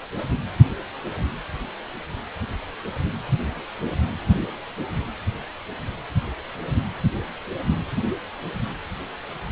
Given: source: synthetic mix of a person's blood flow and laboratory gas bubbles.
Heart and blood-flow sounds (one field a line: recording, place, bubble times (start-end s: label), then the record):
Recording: Doppler ultrasound of blood flow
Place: precordium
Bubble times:
no bubbles
From the record:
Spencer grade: 0 (complete lack of bubble signals)